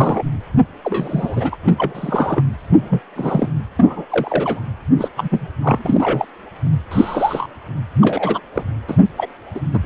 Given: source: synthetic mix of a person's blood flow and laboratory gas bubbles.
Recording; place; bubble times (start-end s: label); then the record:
Doppler ultrasound of blood flow; precordium
0.00-0.23 s: bubbles
0.84-1.56 s: bubbles
1.62-2.43 s: bubbles
2.69-3.01 s: bubbles
3.16-3.49 s: bubbles
3.79-4.05 s: bubbles
4.10-4.62 s: bubbles
4.98-5.08 s: bubbles
5.17-5.47 s: bubbles
5.61-6.25 s: bubbles
6.64-6.71 s: bubbles
6.91-7.47 s: bubbles
8.01-8.40 s: bubbles
8.54-8.63 s: bubbles
8.88-8.97 s: bubbles
9.17-9.27 s: bubbles
9.55-9.61 s: bubbles
9.73-9.79 s: bubbles
9.83-9.86 s: bubbles
From the record:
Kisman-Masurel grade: 242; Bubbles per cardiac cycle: several, 3 to 8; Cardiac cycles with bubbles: 100%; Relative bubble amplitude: moderate (0.250 to 0.450); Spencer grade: 3 (all of the cardiac periods contain showers or single bubble signals, but not dominating or overriding the cardiac motion signals); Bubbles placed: anywhere in the cardiac cycle